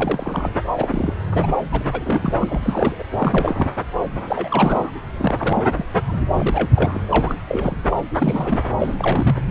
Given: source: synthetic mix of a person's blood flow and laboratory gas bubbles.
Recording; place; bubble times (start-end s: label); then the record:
Doppler ultrasound of blood flow; subclavian vein
0.00-0.51 s: bubbles
0.76-1.14 s: bubbles
1.31-1.54 s: bubbles
1.72-2.33 s: bubbles
2.39-2.96 s: bubbles
2.98-3.03 s: bubbles
3.19-3.73 s: bubbles
4.27-4.91 s: bubbles
5.19-5.34 s: bubbles
5.39-5.63 s: bubbles
5.68-5.83 s: bubbles
6.07-6.21 s: bubbles
6.38-6.70 s: bubbles
6.75-7.01 s: bubbles
7.08-7.36 s: bubbles
7.47-7.76 s: bubbles
7.90-7.97 s: bubbles
8.18-8.65 s: bubbles
8.79-9.36 s: bubbles
9.48-9.51 s: bubbles
From the record:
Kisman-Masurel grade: 342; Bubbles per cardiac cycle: rolling drumbeat, 9 or more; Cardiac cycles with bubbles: 100%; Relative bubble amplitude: moderate (0.250 to 0.450); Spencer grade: 3 (all of the cardiac periods contain showers or single bubble signals, but not dominating or overriding the cardiac motion signals); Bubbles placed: anywhere in the cardiac cycle